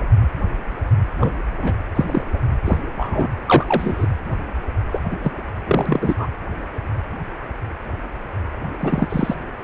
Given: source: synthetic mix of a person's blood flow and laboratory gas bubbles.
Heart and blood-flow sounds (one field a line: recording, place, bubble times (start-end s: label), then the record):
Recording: Doppler ultrasound of blood flow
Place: precordium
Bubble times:
1.18-1.31 s: bubbles
1.62-1.74 s: bubbles
1.95-2.24 s: bubbles
2.33-2.38 s: bubbles
2.65-2.81 s: bubbles
2.96-3.28 s: bubbles
3.46-4.06 s: bubbles
4.92-4.99 s: bubbles
5.10-5.16 s: bubbles
5.23-5.31 s: bubbles
5.67-6.15 s: bubbles
6.18-6.27 s: bubbles
8.79-9.35 s: bubbles
From the record:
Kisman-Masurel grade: 222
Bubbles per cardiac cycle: several, 3 to 8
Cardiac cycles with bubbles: 10 to 50%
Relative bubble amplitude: moderate (0.250 to 0.450)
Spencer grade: 2 (many but less than half of the cardiac periods contain bubble signals, singularly or in groups)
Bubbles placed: anywhere in the cardiac cycle